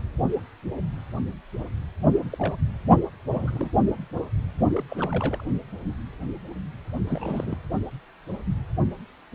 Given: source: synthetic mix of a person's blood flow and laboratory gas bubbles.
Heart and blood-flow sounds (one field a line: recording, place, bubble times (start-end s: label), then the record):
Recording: Doppler ultrasound of blood flow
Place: precordium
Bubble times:
2.30-2.55 s: bubbles
3.34-3.68 s: bubbles
4.76-4.83 s: bubbles
4.89-5.44 s: bubbles
7.07-7.58 s: bubbles
From the record:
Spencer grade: 2 (many but less than half of the cardiac periods contain bubble signals, singularly or in groups)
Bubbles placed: only in the low amplitude regions of the cardiac cycle